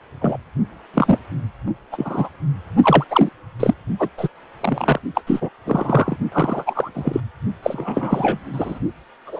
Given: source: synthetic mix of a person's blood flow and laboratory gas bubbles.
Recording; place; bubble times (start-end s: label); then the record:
Doppler ultrasound of blood flow; precordium
0.21-0.37 s: bubbles
0.93-1.19 s: bubbles
1.92-2.29 s: bubbles
2.82-3.04 s: bubbles
3.09-3.29 s: bubbles
3.60-3.74 s: bubbles
3.99-4.09 s: bubbles
4.17-4.28 s: bubbles
4.61-4.99 s: bubbles
5.15-5.21 s: bubbles
5.27-5.50 s: bubbles
5.66-6.17 s: bubbles
6.32-6.90 s: bubbles
6.95-7.21 s: bubbles
7.62-8.39 s: bubbles
8.53-8.79 s: bubbles
9.27-9.40 s: bubbles
From the record:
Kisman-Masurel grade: 243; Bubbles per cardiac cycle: several, 3 to 8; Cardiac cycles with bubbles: 100%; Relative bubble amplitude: loud (0.450 to 0.775); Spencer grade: 3 (all of the cardiac periods contain showers or single bubble signals, but not dominating or overriding the cardiac motion signals); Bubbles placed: only in the low amplitude regions of the cardiac cycle